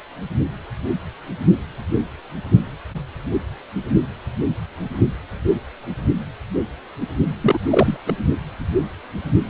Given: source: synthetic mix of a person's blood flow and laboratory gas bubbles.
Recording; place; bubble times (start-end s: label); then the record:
Doppler ultrasound of blood flow; precordium
7.40-7.58 s: bubbles
7.70-7.97 s: bubbles
8.06-8.13 s: bubbles
From the record:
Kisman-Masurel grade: 213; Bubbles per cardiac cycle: several, 3 to 8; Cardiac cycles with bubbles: 1 to 10%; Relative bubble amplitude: loud (0.450 to 0.775); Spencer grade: 1 (occasional bubble signal discernible with the cardiac motion signal, with majority of cardiac periods free of bubbles); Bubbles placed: anywhere in the cardiac cycle